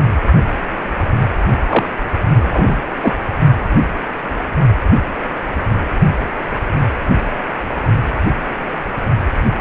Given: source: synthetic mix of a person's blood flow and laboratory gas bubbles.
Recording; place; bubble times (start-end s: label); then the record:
Doppler ultrasound of blood flow; precordium
1.69-1.84 s: bubbles
2.37-2.81 s: bubbles
3.02-3.14 s: bubbles
From the record:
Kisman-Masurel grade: 213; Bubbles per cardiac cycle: several, 3 to 8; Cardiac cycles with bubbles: 1 to 10%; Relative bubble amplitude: loud (0.450 to 0.775); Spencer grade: 1 (occasional bubble signal discernible with the cardiac motion signal, with majority of cardiac periods free of bubbles); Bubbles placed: only in the low amplitude regions of the cardiac cycle